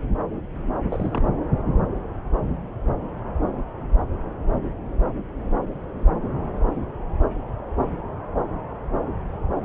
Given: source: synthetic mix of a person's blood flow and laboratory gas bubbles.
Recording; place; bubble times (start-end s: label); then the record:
Doppler ultrasound of blood flow; subclavian vein
0.90-1.27 s: bubbles
From the record:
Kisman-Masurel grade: 211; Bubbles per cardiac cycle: several, 3 to 8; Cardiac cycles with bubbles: 1 to 10%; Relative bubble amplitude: barely perceptible (0.100 to 0.250); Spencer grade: 1 (occasional bubble signal discernible with the cardiac motion signal, with majority of cardiac periods free of bubbles); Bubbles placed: anywhere in the cardiac cycle